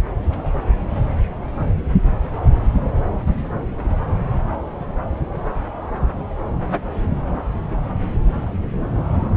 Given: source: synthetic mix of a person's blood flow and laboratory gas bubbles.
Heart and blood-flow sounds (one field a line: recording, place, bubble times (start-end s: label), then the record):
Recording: Doppler ultrasound of blood flow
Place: subclavian vein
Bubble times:
no bubbles
From the record:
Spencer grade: 0 (complete lack of bubble signals)